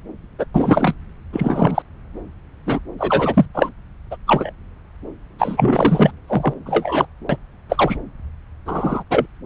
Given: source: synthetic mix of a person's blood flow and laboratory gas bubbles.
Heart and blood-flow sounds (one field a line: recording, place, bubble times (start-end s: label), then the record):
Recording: Doppler ultrasound of blood flow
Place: subclavian vein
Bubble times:
0.39-0.45 s: bubbles
0.54-0.95 s: bubbles
1.32-1.82 s: bubbles
2.66-2.79 s: bubbles
2.98-3.46 s: bubbles
3.54-3.69 s: bubbles
4.11-4.17 s: bubbles
4.27-4.53 s: bubbles
5.39-6.11 s: bubbles
6.28-6.54 s: bubbles
6.66-7.06 s: bubbles
7.29-7.37 s: bubbles
7.69-7.97 s: bubbles
8.65-9.03 s: bubbles
9.10-9.26 s: bubbles
From the record:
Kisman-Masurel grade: 243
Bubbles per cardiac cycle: several, 3 to 8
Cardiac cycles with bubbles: 100%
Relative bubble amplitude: loud (0.450 to 0.775)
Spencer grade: 3 (all of the cardiac periods contain showers or single bubble signals, but not dominating or overriding the cardiac motion signals)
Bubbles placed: anywhere in the cardiac cycle